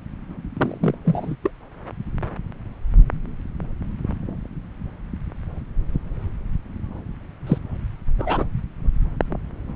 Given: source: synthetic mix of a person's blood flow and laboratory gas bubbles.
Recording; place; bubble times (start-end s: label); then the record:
Doppler ultrasound of blood flow; subclavian vein
0.57-0.95 s: bubbles
1.04-1.36 s: bubbles
1.43-1.50 s: bubbles
7.46-7.58 s: bubbles
8.18-8.45 s: bubbles
From the record:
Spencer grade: 2 (many but less than half of the cardiac periods contain bubble signals, singularly or in groups); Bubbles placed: anywhere in the cardiac cycle